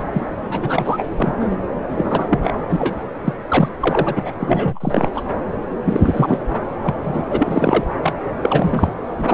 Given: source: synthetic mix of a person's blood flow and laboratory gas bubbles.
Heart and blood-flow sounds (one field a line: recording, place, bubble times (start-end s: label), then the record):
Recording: Doppler ultrasound of blood flow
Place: subclavian vein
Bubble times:
0.00-0.04 s: bubbles
0.12-0.26 s: bubbles
0.49-1.10 s: bubbles
1.16-1.33 s: bubbles
1.41-1.56 s: bubbles
1.97-2.52 s: bubbles
2.69-2.95 s: bubbles
3.24-3.33 s: bubbles
3.48-3.69 s: bubbles
3.79-4.31 s: bubbles
4.40-5.08 s: bubbles
5.14-5.24 s: bubbles
5.85-6.39 s: bubbles
6.83-6.95 s: bubbles
7.03-7.21 s: bubbles
7.30-7.84 s: bubbles
8.03-8.13 s: bubbles
8.41-8.92 s: bubbles
9.18-9.34 s: bubbles
From the record:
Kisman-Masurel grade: 343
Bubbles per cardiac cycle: rolling drumbeat, 9 or more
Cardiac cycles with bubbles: 100%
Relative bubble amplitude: loud (0.450 to 0.775)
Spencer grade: 3 (all of the cardiac periods contain showers or single bubble signals, but not dominating or overriding the cardiac motion signals)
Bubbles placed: anywhere in the cardiac cycle